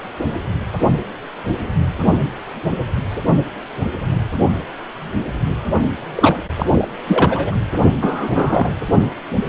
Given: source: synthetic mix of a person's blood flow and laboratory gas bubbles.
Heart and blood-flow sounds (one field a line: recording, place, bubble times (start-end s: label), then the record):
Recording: Doppler ultrasound of blood flow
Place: precordium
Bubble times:
6.15-6.36 s: bubbles
6.58-6.88 s: bubbles
7.07-7.54 s: bubbles
8.00-8.73 s: bubbles
From the record:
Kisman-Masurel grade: 223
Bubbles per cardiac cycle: several, 3 to 8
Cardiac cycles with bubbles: 10 to 50%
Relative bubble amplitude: loud (0.450 to 0.775)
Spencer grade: 2 (many but less than half of the cardiac periods contain bubble signals, singularly or in groups)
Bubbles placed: only in the low amplitude regions of the cardiac cycle